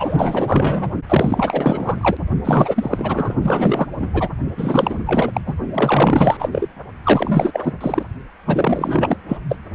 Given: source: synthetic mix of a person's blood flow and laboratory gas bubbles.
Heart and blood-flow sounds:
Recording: Doppler ultrasound of blood flow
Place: precordium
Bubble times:
0.00-0.92 s: bubbles
1.08-2.17 s: bubbles
2.44-3.35 s: bubbles
3.42-3.88 s: bubbles
3.99-4.29 s: bubbles
4.57-5.31 s: bubbles
5.33-5.41 s: bubbles
5.45-5.55 s: bubbles
5.73-6.50 s: bubbles
6.52-6.68 s: bubbles
7.04-7.74 s: bubbles
7.81-8.03 s: bubbles
8.46-9.17 s: bubbles
9.29-9.38 s: bubbles
9.49-9.57 s: bubbles
From the record:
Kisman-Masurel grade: 444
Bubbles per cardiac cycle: continuous sound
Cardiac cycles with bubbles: 100%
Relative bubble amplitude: maximal (0.775 to 0.999)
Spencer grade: 4 (maximum detectable bubble signal sounding continuously throughout systole and diastole of every cardiac period, and overriding the amplitude of the normal cardiac signals)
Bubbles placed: only in the low amplitude regions of the cardiac cycle

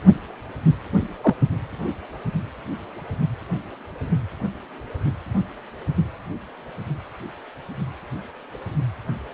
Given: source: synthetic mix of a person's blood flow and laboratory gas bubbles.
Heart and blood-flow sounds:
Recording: Doppler ultrasound of blood flow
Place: precordium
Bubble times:
1.23-1.35 s: bubbles
From the record:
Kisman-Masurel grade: 123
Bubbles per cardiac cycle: 1 to 2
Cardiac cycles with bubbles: 10 to 50%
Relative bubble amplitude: loud (0.450 to 0.775)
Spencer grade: 2 (many but less than half of the cardiac periods contain bubble signals, singularly or in groups)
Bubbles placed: only in the low amplitude regions of the cardiac cycle

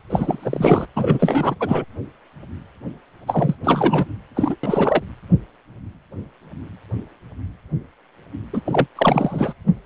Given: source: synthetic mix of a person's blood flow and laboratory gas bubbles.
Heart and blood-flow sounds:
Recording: Doppler ultrasound of blood flow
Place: precordium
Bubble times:
0.10-0.86 s: bubbles
0.95-1.55 s: bubbles
1.59-1.84 s: bubbles
3.27-3.55 s: bubbles
3.64-4.06 s: bubbles
4.35-4.56 s: bubbles
4.63-5.04 s: bubbles
8.53-8.61 s: bubbles
8.66-8.87 s: bubbles
8.96-9.54 s: bubbles
From the record:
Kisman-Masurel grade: 333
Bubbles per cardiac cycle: rolling drumbeat, 9 or more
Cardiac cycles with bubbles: 50 to 99%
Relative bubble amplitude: loud (0.450 to 0.775)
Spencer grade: 3 (all of the cardiac periods contain showers or single bubble signals, but not dominating or overriding the cardiac motion signals)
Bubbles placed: anywhere in the cardiac cycle

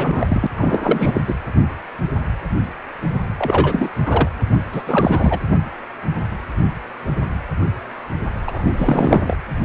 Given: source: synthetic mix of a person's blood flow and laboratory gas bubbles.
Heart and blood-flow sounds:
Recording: Doppler ultrasound of blood flow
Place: precordium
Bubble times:
0.00-0.47 s: bubbles
0.56-1.21 s: bubbles
1.27-1.34 s: bubbles
3.38-3.88 s: bubbles
4.05-4.29 s: bubbles
4.71-4.83 s: bubbles
4.87-5.38 s: bubbles
8.47-9.36 s: bubbles
From the record:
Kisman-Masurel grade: 333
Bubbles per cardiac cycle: rolling drumbeat, 9 or more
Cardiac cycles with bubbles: 50 to 99%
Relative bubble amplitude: loud (0.450 to 0.775)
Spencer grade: 3 (all of the cardiac periods contain showers or single bubble signals, but not dominating or overriding the cardiac motion signals)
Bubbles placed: anywhere in the cardiac cycle

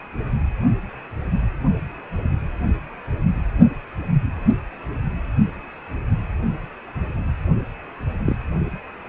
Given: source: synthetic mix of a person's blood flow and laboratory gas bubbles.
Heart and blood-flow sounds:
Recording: Doppler ultrasound of blood flow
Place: precordium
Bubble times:
8.24-8.36 s: bubbles
From the record:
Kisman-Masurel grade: 111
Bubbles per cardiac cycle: 1 to 2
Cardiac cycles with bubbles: 1 to 10%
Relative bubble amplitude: barely perceptible (0.100 to 0.250)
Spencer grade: 1 (occasional bubble signal discernible with the cardiac motion signal, with majority of cardiac periods free of bubbles)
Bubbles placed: only in the low amplitude regions of the cardiac cycle

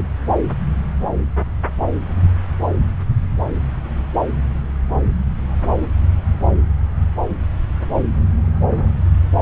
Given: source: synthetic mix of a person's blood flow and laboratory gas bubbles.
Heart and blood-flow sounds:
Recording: Doppler ultrasound of blood flow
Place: subclavian vein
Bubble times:
0.00-0.08 s: bubbles
From the record:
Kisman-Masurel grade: 211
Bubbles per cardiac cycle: several, 3 to 8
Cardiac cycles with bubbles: 1 to 10%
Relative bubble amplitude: barely perceptible (0.100 to 0.250)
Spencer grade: 1 (occasional bubble signal discernible with the cardiac motion signal, with majority of cardiac periods free of bubbles)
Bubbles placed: anywhere in the cardiac cycle

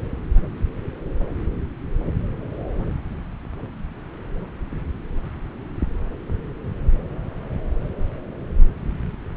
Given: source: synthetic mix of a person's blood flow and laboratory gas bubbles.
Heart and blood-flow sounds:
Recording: Doppler ultrasound of blood flow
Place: subclavian vein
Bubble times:
no bubbles
From the record:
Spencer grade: 0 (complete lack of bubble signals)

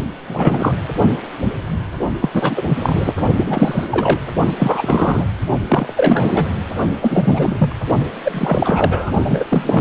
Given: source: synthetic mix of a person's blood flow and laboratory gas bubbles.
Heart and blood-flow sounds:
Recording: Doppler ultrasound of blood flow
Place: precordium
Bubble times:
0.00-0.02 s: bubbles
0.27-0.76 s: bubbles
2.22-2.29 s: bubbles
2.33-2.62 s: bubbles
2.68-3.14 s: bubbles
3.36-3.87 s: bubbles
3.91-4.20 s: bubbles
4.59-5.26 s: bubbles
5.69-5.93 s: bubbles
5.96-6.49 s: bubbles
7.01-7.75 s: bubbles
8.24-9.11 s: bubbles
9.23-9.44 s: bubbles
9.50-9.81 s: bubbles
From the record:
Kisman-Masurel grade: 343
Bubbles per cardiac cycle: rolling drumbeat, 9 or more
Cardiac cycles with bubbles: 100%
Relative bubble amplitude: loud (0.450 to 0.775)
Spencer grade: 3 (all of the cardiac periods contain showers or single bubble signals, but not dominating or overriding the cardiac motion signals)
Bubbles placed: only in the low amplitude regions of the cardiac cycle

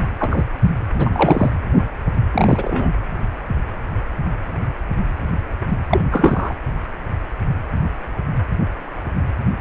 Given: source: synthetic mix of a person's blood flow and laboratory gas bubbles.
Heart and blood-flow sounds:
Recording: Doppler ultrasound of blood flow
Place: precordium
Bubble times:
0.19-0.44 s: bubbles
0.62-0.71 s: bubbles
0.98-1.50 s: bubbles
2.32-2.92 s: bubbles
5.90-6.02 s: bubbles
6.11-6.55 s: bubbles
From the record:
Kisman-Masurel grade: 223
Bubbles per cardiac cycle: several, 3 to 8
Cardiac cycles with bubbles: 10 to 50%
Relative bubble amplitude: loud (0.450 to 0.775)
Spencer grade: 2 (many but less than half of the cardiac periods contain bubble signals, singularly or in groups)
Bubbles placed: anywhere in the cardiac cycle

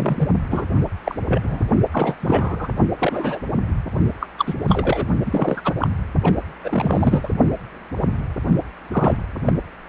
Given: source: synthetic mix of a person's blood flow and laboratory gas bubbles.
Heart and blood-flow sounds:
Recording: Doppler ultrasound of blood flow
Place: precordium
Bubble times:
0.00-0.29 s: bubbles
0.51-0.64 s: bubbles
1.04-1.15 s: bubbles
1.28-1.65 s: bubbles
1.92-2.15 s: bubbles
2.20-2.73 s: bubbles
2.99-3.41 s: bubbles
4.21-4.27 s: bubbles
4.38-4.54 s: bubbles
4.68-5.06 s: bubbles
5.25-5.62 s: bubbles
5.64-5.73 s: bubbles
5.80-5.88 s: bubbles
6.23-6.33 s: bubbles
6.64-7.29 s: bubbles
8.92-9.19 s: bubbles
9.46-9.53 s: bubbles
From the record:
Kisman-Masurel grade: 232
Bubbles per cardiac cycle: several, 3 to 8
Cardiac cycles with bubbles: 50 to 99%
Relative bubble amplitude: moderate (0.250 to 0.450)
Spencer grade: 3 (all of the cardiac periods contain showers or single bubble signals, but not dominating or overriding the cardiac motion signals)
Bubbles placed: only in the low amplitude regions of the cardiac cycle

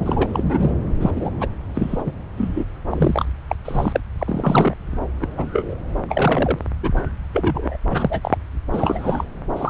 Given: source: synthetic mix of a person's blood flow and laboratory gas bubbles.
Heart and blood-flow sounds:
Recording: Doppler ultrasound of blood flow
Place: subclavian vein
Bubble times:
0.00-0.76 s: bubbles
1.00-1.10 s: bubbles
1.16-1.30 s: bubbles
1.40-1.48 s: bubbles
1.74-2.03 s: bubbles
2.05-2.12 s: bubbles
2.37-2.65 s: bubbles
2.90-3.25 s: bubbles
3.48-3.56 s: bubbles
3.65-4.00 s: bubbles
4.19-4.75 s: bubbles
5.21-5.28 s: bubbles
5.38-5.50 s: bubbles
5.53-5.75 s: bubbles
6.08-6.59 s: bubbles
6.82-6.91 s: bubbles
7.33-7.77 s: bubbles
7.90-8.38 s: bubbles
8.72-9.24 s: bubbles
9.56-9.70 s: bubbles
From the record:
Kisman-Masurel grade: 243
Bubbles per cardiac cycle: several, 3 to 8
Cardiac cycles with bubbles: 100%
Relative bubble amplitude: loud (0.450 to 0.775)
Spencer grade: 3 (all of the cardiac periods contain showers or single bubble signals, but not dominating or overriding the cardiac motion signals)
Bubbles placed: anywhere in the cardiac cycle

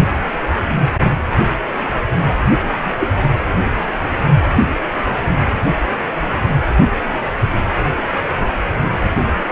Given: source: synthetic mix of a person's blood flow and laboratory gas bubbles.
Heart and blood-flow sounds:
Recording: Doppler ultrasound of blood flow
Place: precordium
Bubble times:
2.28-2.34 s: bubbles
2.63-2.71 s: bubbles
2.81-2.92 s: bubbles
2.99-3.10 s: bubbles
From the record:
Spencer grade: 1 (occasional bubble signal discernible with the cardiac motion signal, with majority of cardiac periods free of bubbles)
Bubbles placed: anywhere in the cardiac cycle

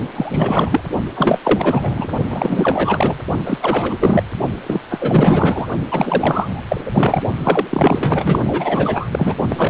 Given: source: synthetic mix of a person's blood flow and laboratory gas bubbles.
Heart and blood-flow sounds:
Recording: Doppler ultrasound of blood flow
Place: precordium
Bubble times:
0.15-0.80 s: bubbles
1.16-1.39 s: bubbles
1.43-2.08 s: bubbles
2.29-3.14 s: bubbles
3.46-3.58 s: bubbles
3.61-4.23 s: bubbles
4.66-4.81 s: bubbles
4.90-5.67 s: bubbles
5.91-6.64 s: bubbles
6.69-6.81 s: bubbles
6.86-7.23 s: bubbles
7.43-7.65 s: bubbles
7.70-9.35 s: bubbles
9.49-9.70 s: bubbles
From the record:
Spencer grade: 4 (maximum detectable bubble signal sounding continuously throughout systole and diastole of every cardiac period, and overriding the amplitude of the normal cardiac signals)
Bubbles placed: only in the low amplitude regions of the cardiac cycle

